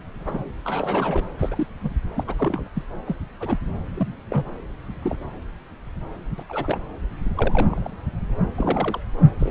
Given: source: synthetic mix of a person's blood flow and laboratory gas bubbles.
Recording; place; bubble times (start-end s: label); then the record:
Doppler ultrasound of blood flow; subclavian vein
0.18-0.48 s: bubbles
0.64-1.25 s: bubbles
1.39-1.67 s: bubbles
1.83-1.91 s: bubbles
2.15-2.24 s: bubbles
2.27-2.35 s: bubbles
2.38-2.67 s: bubbles
2.75-2.83 s: bubbles
3.06-3.16 s: bubbles
3.40-3.58 s: bubbles
3.94-4.14 s: bubbles
4.30-4.50 s: bubbles
5.02-5.16 s: bubbles
6.38-6.43 s: bubbles
6.49-6.77 s: bubbles
7.35-7.88 s: bubbles
8.57-9.00 s: bubbles
9.39-9.51 s: bubbles
From the record:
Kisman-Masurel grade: 242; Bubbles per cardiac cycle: several, 3 to 8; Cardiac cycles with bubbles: 100%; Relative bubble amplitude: moderate (0.250 to 0.450); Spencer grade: 3 (all of the cardiac periods contain showers or single bubble signals, but not dominating or overriding the cardiac motion signals); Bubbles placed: anywhere in the cardiac cycle